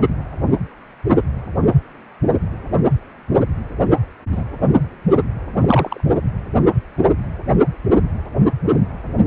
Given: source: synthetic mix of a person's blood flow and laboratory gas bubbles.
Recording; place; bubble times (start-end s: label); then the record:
Doppler ultrasound of blood flow; precordium
4.31-4.44 s: bubbles
5.60-6.00 s: bubbles
From the record:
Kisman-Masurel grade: 122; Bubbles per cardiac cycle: 1 to 2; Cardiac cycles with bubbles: 10 to 50%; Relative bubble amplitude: moderate (0.250 to 0.450); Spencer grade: 2 (many but less than half of the cardiac periods contain bubble signals, singularly or in groups); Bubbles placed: only in the low amplitude regions of the cardiac cycle